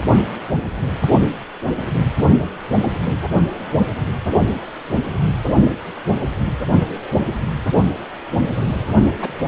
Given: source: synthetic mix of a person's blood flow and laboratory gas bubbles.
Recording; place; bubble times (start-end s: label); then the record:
Doppler ultrasound of blood flow; precordium
8.42-8.53 s: bubbles
9.21-9.29 s: bubbles
From the record:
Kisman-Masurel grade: 122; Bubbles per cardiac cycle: 1 to 2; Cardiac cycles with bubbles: 10 to 50%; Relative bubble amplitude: moderate (0.250 to 0.450); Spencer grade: 2 (many but less than half of the cardiac periods contain bubble signals, singularly or in groups); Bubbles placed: anywhere in the cardiac cycle